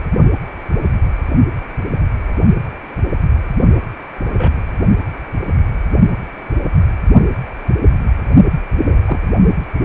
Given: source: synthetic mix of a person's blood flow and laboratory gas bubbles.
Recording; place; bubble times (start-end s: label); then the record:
Doppler ultrasound of blood flow; precordium
4.38-4.52 s: bubbles
8.86-8.99 s: bubbles
9.07-9.19 s: bubbles
From the record:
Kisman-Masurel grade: 122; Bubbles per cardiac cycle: 1 to 2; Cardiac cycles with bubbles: 10 to 50%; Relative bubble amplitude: moderate (0.250 to 0.450); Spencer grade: 2 (many but less than half of the cardiac periods contain bubble signals, singularly or in groups); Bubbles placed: only in the low amplitude regions of the cardiac cycle